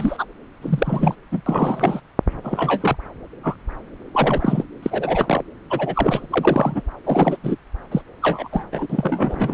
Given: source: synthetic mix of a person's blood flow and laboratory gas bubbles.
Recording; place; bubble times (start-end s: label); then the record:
Doppler ultrasound of blood flow; subclavian vein
0.00-0.25 s: bubbles
0.61-1.15 s: bubbles
1.31-1.42 s: bubbles
1.46-2.00 s: bubbles
2.43-2.96 s: bubbles
3.43-3.55 s: bubbles
4.14-4.63 s: bubbles
4.83-5.42 s: bubbles
5.70-6.26 s: bubbles
6.30-6.83 s: bubbles
7.04-7.37 s: bubbles
7.43-7.57 s: bubbles
7.91-8.02 s: bubbles
8.22-8.48 s: bubbles
8.52-8.65 s: bubbles
8.72-8.87 s: bubbles
8.90-9.53 s: bubbles
From the record:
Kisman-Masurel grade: 242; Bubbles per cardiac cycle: several, 3 to 8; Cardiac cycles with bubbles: 100%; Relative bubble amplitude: moderate (0.250 to 0.450); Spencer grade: 3 (all of the cardiac periods contain showers or single bubble signals, but not dominating or overriding the cardiac motion signals); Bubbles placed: anywhere in the cardiac cycle